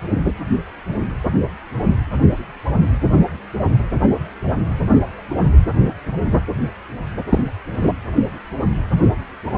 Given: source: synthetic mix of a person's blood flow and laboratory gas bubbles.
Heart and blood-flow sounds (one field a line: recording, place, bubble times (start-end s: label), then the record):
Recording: Doppler ultrasound of blood flow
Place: precordium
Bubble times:
7.29-7.44 s: bubbles
7.81-7.92 s: bubbles
From the record:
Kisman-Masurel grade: 213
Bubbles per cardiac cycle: several, 3 to 8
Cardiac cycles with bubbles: 1 to 10%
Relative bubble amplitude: loud (0.450 to 0.775)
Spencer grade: 1 (occasional bubble signal discernible with the cardiac motion signal, with majority of cardiac periods free of bubbles)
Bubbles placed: anywhere in the cardiac cycle